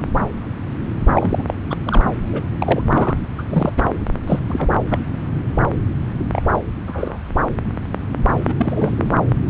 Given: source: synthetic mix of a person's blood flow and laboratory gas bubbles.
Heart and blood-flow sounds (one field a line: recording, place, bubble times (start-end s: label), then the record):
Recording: Doppler ultrasound of blood flow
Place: subclavian vein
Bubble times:
1.14-1.44 s: bubbles
1.48-1.53 s: bubbles
1.70-1.75 s: bubbles
1.86-2.03 s: bubbles
2.32-2.41 s: bubbles
2.58-2.83 s: bubbles
2.90-3.15 s: bubbles
3.38-3.42 s: bubbles
3.50-3.73 s: bubbles
3.77-3.82 s: bubbles
4.27-4.39 s: bubbles
4.48-4.68 s: bubbles
4.89-4.98 s: bubbles
6.32-6.42 s: bubbles
6.87-7.18 s: bubbles
8.48-8.54 s: bubbles
8.58-9.13 s: bubbles
From the record:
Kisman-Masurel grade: 232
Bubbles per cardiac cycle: several, 3 to 8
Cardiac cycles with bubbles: 50 to 99%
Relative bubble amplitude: moderate (0.250 to 0.450)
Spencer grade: 3 (all of the cardiac periods contain showers or single bubble signals, but not dominating or overriding the cardiac motion signals)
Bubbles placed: anywhere in the cardiac cycle